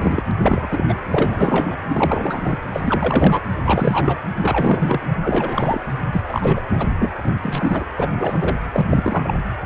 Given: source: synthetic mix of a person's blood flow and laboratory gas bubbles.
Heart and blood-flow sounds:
Doppler ultrasound of blood flow; precordium
0.00-0.22 s: bubbles
0.27-0.32 s: bubbles
0.42-0.67 s: bubbles
0.70-0.95 s: bubbles
1.11-1.75 s: bubbles
1.88-2.58 s: bubbles
2.73-2.80 s: bubbles
2.84-3.41 s: bubbles
3.64-4.19 s: bubbles
4.36-5.00 s: bubbles
5.23-5.81 s: bubbles
6.12-6.23 s: bubbles
6.29-6.61 s: bubbles
6.77-6.88 s: bubbles
6.99-7.12 s: bubbles
7.28-7.37 s: bubbles
7.43-7.86 s: bubbles
7.97-8.10 s: bubbles
8.17-8.55 s: bubbles
8.72-9.38 s: bubbles
From the record:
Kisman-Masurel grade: 343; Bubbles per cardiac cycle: rolling drumbeat, 9 or more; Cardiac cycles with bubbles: 100%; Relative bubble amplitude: loud (0.450 to 0.775); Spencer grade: 3 (all of the cardiac periods contain showers or single bubble signals, but not dominating or overriding the cardiac motion signals); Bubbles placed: anywhere in the cardiac cycle

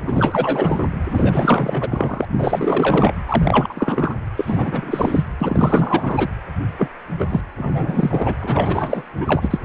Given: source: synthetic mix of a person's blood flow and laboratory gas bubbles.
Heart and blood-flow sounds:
Doppler ultrasound of blood flow; precordium
0.02-0.90 s: bubbles
1.08-2.27 s: bubbles
2.33-3.13 s: bubbles
3.28-4.15 s: bubbles
4.37-5.24 s: bubbles
5.40-6.29 s: bubbles
6.78-6.88 s: bubbles
7.18-7.41 s: bubbles
7.57-8.36 s: bubbles
8.41-9.04 s: bubbles
9.17-9.56 s: bubbles
From the record:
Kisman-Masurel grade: 444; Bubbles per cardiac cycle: continuous sound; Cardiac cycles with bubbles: 100%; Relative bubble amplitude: maximal (0.775 to 0.999); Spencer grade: 4 (maximum detectable bubble signal sounding continuously throughout systole and diastole of every cardiac period, and overriding the amplitude of the normal cardiac signals); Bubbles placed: anywhere in the cardiac cycle

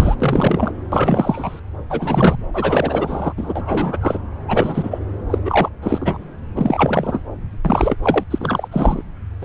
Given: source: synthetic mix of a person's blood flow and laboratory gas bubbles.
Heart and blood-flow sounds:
Doppler ultrasound of blood flow; subclavian vein
0.00-0.15 s: bubbles
0.20-0.72 s: bubbles
0.92-1.59 s: bubbles
1.90-2.35 s: bubbles
2.53-3.33 s: bubbles
3.37-3.98 s: bubbles
4.01-4.19 s: bubbles
4.48-4.98 s: bubbles
5.29-5.38 s: bubbles
5.45-5.69 s: bubbles
5.82-6.18 s: bubbles
6.56-7.22 s: bubbles
7.64-7.96 s: bubbles
8.02-8.23 s: bubbles
8.30-8.68 s: bubbles
8.71-9.03 s: bubbles
9.41-9.45 s: bubbles
From the record:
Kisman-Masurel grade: 343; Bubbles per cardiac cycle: rolling drumbeat, 9 or more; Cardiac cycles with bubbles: 100%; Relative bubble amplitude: loud (0.450 to 0.775); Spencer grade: 3 (all of the cardiac periods contain showers or single bubble signals, but not dominating or overriding the cardiac motion signals); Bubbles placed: anywhere in the cardiac cycle

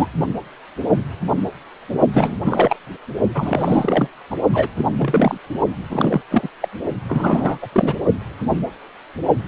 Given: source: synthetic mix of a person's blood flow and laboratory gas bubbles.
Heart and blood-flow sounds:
Doppler ultrasound of blood flow; precordium
0.00-0.07 s: bubbles
2.13-2.35 s: bubbles
2.44-2.76 s: bubbles
3.34-4.08 s: bubbles
4.30-4.37 s: bubbles
4.53-4.68 s: bubbles
4.78-4.86 s: bubbles
4.99-5.38 s: bubbles
5.90-6.21 s: bubbles
6.31-6.49 s: bubbles
6.60-6.68 s: bubbles
7.08-7.58 s: bubbles
7.62-7.69 s: bubbles
7.72-7.94 s: bubbles
From the record:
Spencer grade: 3 (all of the cardiac periods contain showers or single bubble signals, but not dominating or overriding the cardiac motion signals); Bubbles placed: only in the low amplitude regions of the cardiac cycle

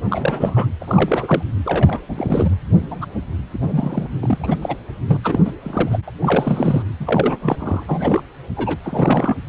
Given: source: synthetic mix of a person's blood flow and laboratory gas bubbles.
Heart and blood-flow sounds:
Doppler ultrasound of blood flow; precordium
0.08-0.67 s: bubbles
0.81-1.42 s: bubbles
1.65-2.00 s: bubbles
2.08-2.50 s: bubbles
2.90-3.05 s: bubbles
3.52-4.08 s: bubbles
4.22-4.59 s: bubbles
4.62-4.76 s: bubbles
5.06-5.17 s: bubbles
5.24-5.40 s: bubbles
5.45-5.51 s: bubbles
5.63-5.99 s: bubbles
6.08-6.11 s: bubbles
6.21-6.83 s: bubbles
7.00-7.83 s: bubbles
7.87-8.21 s: bubbles
8.56-8.79 s: bubbles
8.83-9.43 s: bubbles
From the record:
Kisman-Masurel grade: 342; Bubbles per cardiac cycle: rolling drumbeat, 9 or more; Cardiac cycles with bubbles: 100%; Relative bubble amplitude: moderate (0.250 to 0.450); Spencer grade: 3 (all of the cardiac periods contain showers or single bubble signals, but not dominating or overriding the cardiac motion signals); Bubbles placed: anywhere in the cardiac cycle

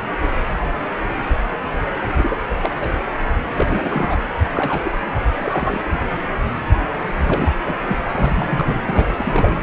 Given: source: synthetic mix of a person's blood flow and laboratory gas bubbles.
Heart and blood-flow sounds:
Doppler ultrasound of blood flow; precordium
2.17-2.39 s: bubbles
2.62-2.71 s: bubbles
2.80-2.90 s: bubbles
3.53-4.17 s: bubbles
4.45-4.91 s: bubbles
5.40-5.80 s: bubbles
7.23-7.56 s: bubbles
7.65-7.75 s: bubbles
7.86-7.98 s: bubbles
8.09-8.75 s: bubbles
8.86-9.57 s: bubbles
From the record:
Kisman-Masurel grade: 232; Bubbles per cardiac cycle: several, 3 to 8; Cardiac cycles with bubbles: 50 to 99%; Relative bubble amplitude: moderate (0.250 to 0.450); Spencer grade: 3 (all of the cardiac periods contain showers or single bubble signals, but not dominating or overriding the cardiac motion signals); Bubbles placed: anywhere in the cardiac cycle

